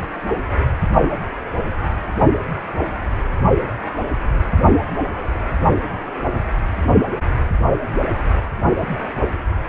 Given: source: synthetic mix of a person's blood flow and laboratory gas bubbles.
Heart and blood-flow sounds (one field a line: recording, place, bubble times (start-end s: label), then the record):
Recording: Doppler ultrasound of blood flow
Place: precordium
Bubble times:
no bubbles
From the record:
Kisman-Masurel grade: 000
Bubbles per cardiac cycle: 0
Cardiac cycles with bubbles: 0%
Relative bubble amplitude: no bubbles discernible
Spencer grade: 0 (complete lack of bubble signals)